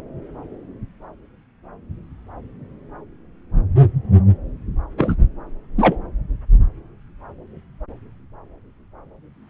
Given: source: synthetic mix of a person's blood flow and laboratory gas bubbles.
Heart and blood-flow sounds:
Doppler ultrasound of blood flow; subclavian vein
4.97-5.16 s: bubbles
5.78-5.96 s: bubbles
From the record:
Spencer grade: 2 (many but less than half of the cardiac periods contain bubble signals, singularly or in groups); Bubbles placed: anywhere in the cardiac cycle

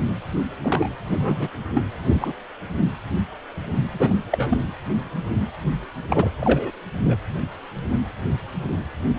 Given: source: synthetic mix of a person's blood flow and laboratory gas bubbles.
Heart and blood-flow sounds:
Doppler ultrasound of blood flow; precordium
0.64-0.89 s: bubbles
1.12-1.49 s: bubbles
1.74-1.85 s: bubbles
2.04-2.33 s: bubbles
3.91-4.13 s: bubbles
4.32-4.59 s: bubbles
6.09-6.30 s: bubbles
6.41-6.71 s: bubbles
7.04-7.17 s: bubbles
From the record:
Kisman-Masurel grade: 222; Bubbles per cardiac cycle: several, 3 to 8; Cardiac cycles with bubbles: 10 to 50%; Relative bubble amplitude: moderate (0.250 to 0.450); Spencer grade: 2 (many but less than half of the cardiac periods contain bubble signals, singularly or in groups); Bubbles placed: anywhere in the cardiac cycle

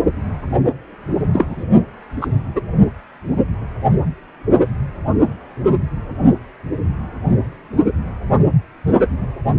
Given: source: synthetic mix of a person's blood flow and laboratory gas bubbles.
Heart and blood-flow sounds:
Doppler ultrasound of blood flow; precordium
1.33-1.64 s: bubbles
2.22-2.27 s: bubbles
2.55-2.60 s: bubbles
From the record:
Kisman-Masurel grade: 123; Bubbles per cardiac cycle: 1 to 2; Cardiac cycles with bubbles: 10 to 50%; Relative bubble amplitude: loud (0.450 to 0.775); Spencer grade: 2 (many but less than half of the cardiac periods contain bubble signals, singularly or in groups); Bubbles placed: only in the low amplitude regions of the cardiac cycle

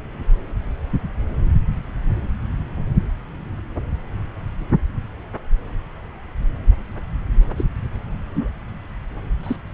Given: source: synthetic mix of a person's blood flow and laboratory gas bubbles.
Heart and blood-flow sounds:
Doppler ultrasound of blood flow; subclavian vein
7.57-7.64 s: bubbles
8.33-8.49 s: bubbles
9.43-9.56 s: bubbles
From the record:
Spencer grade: 2 (many but less than half of the cardiac periods contain bubble signals, singularly or in groups); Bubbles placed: anywhere in the cardiac cycle

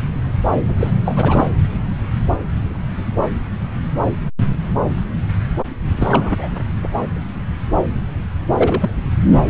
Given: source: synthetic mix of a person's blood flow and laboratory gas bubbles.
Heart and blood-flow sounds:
Doppler ultrasound of blood flow; subclavian vein
0.67-0.91 s: bubbles
1.04-1.49 s: bubbles
5.96-6.48 s: bubbles
8.52-8.91 s: bubbles
From the record:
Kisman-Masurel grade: 222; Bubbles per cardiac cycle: several, 3 to 8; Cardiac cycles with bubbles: 10 to 50%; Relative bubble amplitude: moderate (0.250 to 0.450); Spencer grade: 2 (many but less than half of the cardiac periods contain bubble signals, singularly or in groups); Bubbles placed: anywhere in the cardiac cycle

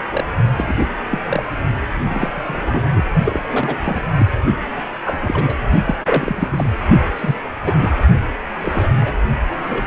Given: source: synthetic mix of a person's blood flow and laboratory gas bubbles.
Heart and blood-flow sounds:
Doppler ultrasound of blood flow; precordium
0.10-0.24 s: bubbles
0.57-0.88 s: bubbles
1.10-1.20 s: bubbles
1.26-1.43 s: bubbles
2.05-2.29 s: bubbles
2.35-2.85 s: bubbles
2.94-3.04 s: bubbles
3.24-3.42 s: bubbles
3.50-3.77 s: bubbles
3.83-4.02 s: bubbles
4.19-4.26 s: bubbles
5.03-5.56 s: bubbles
5.86-5.95 s: bubbles
6.04-6.50 s: bubbles
6.53-6.74 s: bubbles
7.16-7.36 s: bubbles
7.62-7.92 s: bubbles
8.60-8.88 s: bubbles
9.00-9.20 s: bubbles
9.66-9.87 s: bubbles
From the record:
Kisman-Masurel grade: 242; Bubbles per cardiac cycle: several, 3 to 8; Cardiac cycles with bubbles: 100%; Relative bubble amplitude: moderate (0.250 to 0.450); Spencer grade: 3 (all of the cardiac periods contain showers or single bubble signals, but not dominating or overriding the cardiac motion signals); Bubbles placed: only in the low amplitude regions of the cardiac cycle

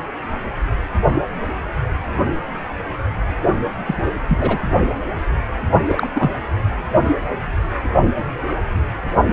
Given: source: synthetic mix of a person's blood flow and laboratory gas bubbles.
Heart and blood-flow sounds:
Doppler ultrasound of blood flow; precordium
3.86-3.95 s: bubbles
4.28-4.61 s: bubbles
5.88-6.08 s: bubbles
6.15-6.30 s: bubbles
From the record:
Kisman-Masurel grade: 222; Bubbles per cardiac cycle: several, 3 to 8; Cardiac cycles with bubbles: 10 to 50%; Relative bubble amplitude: moderate (0.250 to 0.450); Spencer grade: 2 (many but less than half of the cardiac periods contain bubble signals, singularly or in groups); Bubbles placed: only in the low amplitude regions of the cardiac cycle

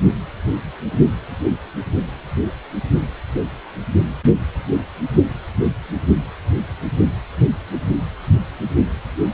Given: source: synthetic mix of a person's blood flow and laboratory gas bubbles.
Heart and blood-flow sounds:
Doppler ultrasound of blood flow; precordium
no bubbles
From the record:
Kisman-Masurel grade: 000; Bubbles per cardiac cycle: 0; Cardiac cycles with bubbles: 0%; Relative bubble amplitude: no bubbles discernible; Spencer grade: 0 (complete lack of bubble signals)

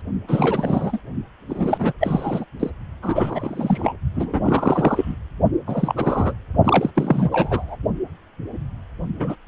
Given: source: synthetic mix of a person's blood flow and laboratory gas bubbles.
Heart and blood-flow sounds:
Doppler ultrasound of blood flow; precordium
0.28-0.99 s: bubbles
1.49-1.93 s: bubbles
2.00-2.45 s: bubbles
2.60-2.71 s: bubbles
3.02-3.94 s: bubbles
4.14-5.16 s: bubbles
5.67-6.33 s: bubbles
6.64-6.91 s: bubbles
6.96-7.29 s: bubbles
7.32-7.75 s: bubbles
9.19-9.36 s: bubbles
From the record:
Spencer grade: 3 (all of the cardiac periods contain showers or single bubble signals, but not dominating or overriding the cardiac motion signals); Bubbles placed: only in the low amplitude regions of the cardiac cycle

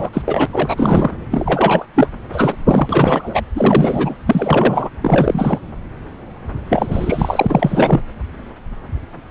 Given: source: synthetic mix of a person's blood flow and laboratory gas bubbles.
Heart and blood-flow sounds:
Doppler ultrasound of blood flow; subclavian vein
0.00-0.10 s: bubbles
0.13-0.22 s: bubbles
0.26-0.46 s: bubbles
0.53-1.10 s: bubbles
1.31-1.85 s: bubbles
1.94-2.09 s: bubbles
2.32-2.55 s: bubbles
2.67-3.42 s: bubbles
3.55-4.15 s: bubbles
4.26-4.90 s: bubbles
5.02-5.59 s: bubbles
6.70-8.01 s: bubbles
From the record:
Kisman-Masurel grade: 333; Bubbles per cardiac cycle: rolling drumbeat, 9 or more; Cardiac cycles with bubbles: 50 to 99%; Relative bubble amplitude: loud (0.450 to 0.775); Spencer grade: 3 (all of the cardiac periods contain showers or single bubble signals, but not dominating or overriding the cardiac motion signals); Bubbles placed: anywhere in the cardiac cycle

